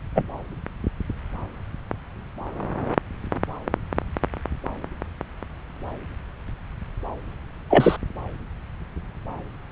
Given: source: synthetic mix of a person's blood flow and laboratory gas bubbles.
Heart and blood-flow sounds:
Doppler ultrasound of blood flow; subclavian vein
0.15-0.26 s: bubbles
7.69-7.96 s: bubbles
From the record:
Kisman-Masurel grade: 113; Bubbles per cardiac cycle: 1 to 2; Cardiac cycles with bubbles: 1 to 10%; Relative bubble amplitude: loud (0.450 to 0.775); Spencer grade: 1 (occasional bubble signal discernible with the cardiac motion signal, with majority of cardiac periods free of bubbles); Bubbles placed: anywhere in the cardiac cycle

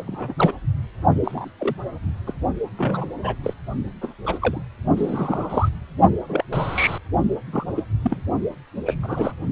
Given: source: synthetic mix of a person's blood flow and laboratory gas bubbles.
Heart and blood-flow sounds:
Doppler ultrasound of blood flow; precordium
0.07-0.34 s: bubbles
0.36-0.52 s: bubbles
1.24-1.50 s: bubbles
1.59-1.75 s: bubbles
2.27-2.33 s: bubbles
2.77-3.06 s: bubbles
3.23-3.35 s: bubbles
3.44-3.54 s: bubbles
4.01-4.13 s: bubbles
4.24-4.38 s: bubbles
4.42-4.61 s: bubbles
4.96-5.69 s: bubbles
6.28-6.43 s: bubbles
6.53-6.98 s: bubbles
7.53-7.65 s: bubbles
7.75-7.83 s: bubbles
8.02-8.22 s: bubbles
8.85-8.94 s: bubbles
9.02-9.37 s: bubbles
From the record:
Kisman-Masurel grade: 242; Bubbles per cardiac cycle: several, 3 to 8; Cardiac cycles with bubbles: 100%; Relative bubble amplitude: moderate (0.250 to 0.450); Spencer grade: 3 (all of the cardiac periods contain showers or single bubble signals, but not dominating or overriding the cardiac motion signals); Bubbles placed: only in the low amplitude regions of the cardiac cycle

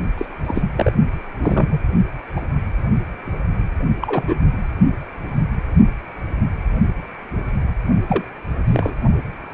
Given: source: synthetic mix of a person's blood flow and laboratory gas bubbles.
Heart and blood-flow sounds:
Doppler ultrasound of blood flow; precordium
0.18-0.26 s: bubbles
0.44-0.62 s: bubbles
0.76-0.91 s: bubbles
1.42-1.80 s: bubbles
2.36-2.40 s: bubbles
4.01-4.35 s: bubbles
8.08-8.24 s: bubbles
8.67-8.94 s: bubbles
From the record:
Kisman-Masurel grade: 222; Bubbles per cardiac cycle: several, 3 to 8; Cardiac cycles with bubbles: 10 to 50%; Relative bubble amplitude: moderate (0.250 to 0.450); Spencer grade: 2 (many but less than half of the cardiac periods contain bubble signals, singularly or in groups); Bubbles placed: only in the low amplitude regions of the cardiac cycle

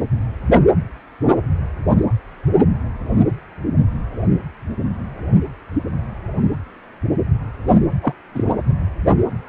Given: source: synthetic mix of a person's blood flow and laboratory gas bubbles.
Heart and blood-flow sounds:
Doppler ultrasound of blood flow; precordium
8.02-8.13 s: bubbles
8.35-8.44 s: bubbles
From the record:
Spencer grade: 1 (occasional bubble signal discernible with the cardiac motion signal, with majority of cardiac periods free of bubbles); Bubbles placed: anywhere in the cardiac cycle

